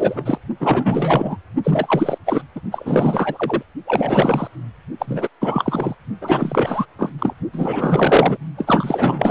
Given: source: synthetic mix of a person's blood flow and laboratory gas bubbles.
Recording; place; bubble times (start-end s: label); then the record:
Doppler ultrasound of blood flow; precordium
0.00-0.38 s: bubbles
0.59-1.37 s: bubbles
1.64-2.18 s: bubbles
2.25-2.42 s: bubbles
2.56-2.60 s: bubbles
2.72-3.62 s: bubbles
3.87-4.48 s: bubbles
4.99-5.29 s: bubbles
5.41-5.95 s: bubbles
6.21-6.86 s: bubbles
6.98-7.12 s: bubbles
7.19-7.34 s: bubbles
7.53-8.38 s: bubbles
8.57-9.31 s: bubbles
From the record:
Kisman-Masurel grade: 444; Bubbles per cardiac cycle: continuous sound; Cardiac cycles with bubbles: 100%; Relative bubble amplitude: maximal (0.775 to 0.999); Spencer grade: 4 (maximum detectable bubble signal sounding continuously throughout systole and diastole of every cardiac period, and overriding the amplitude of the normal cardiac signals); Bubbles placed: only in the low amplitude regions of the cardiac cycle